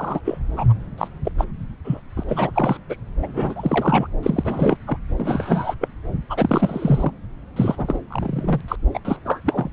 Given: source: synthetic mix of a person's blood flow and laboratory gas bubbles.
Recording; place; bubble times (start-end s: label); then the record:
Doppler ultrasound of blood flow; subclavian vein
0.00-0.21 s: bubbles
0.24-0.38 s: bubbles
0.52-0.73 s: bubbles
0.97-1.08 s: bubbles
1.24-1.31 s: bubbles
1.38-1.44 s: bubbles
1.84-2.00 s: bubbles
2.16-2.24 s: bubbles
2.29-2.51 s: bubbles
2.54-2.77 s: bubbles
2.90-2.96 s: bubbles
3.22-4.07 s: bubbles
4.22-4.77 s: bubbles
4.87-4.97 s: bubbles
5.17-5.75 s: bubbles
5.80-5.88 s: bubbles
6.29-7.11 s: bubbles
7.56-8.00 s: bubbles
8.11-8.61 s: bubbles
8.68-8.76 s: bubbles
8.94-9.00 s: bubbles
9.04-9.17 s: bubbles
9.25-9.41 s: bubbles
9.46-9.70 s: bubbles
From the record:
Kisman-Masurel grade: 342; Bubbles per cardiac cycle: rolling drumbeat, 9 or more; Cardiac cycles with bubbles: 100%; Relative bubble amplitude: moderate (0.250 to 0.450); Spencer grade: 3 (all of the cardiac periods contain showers or single bubble signals, but not dominating or overriding the cardiac motion signals); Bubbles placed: anywhere in the cardiac cycle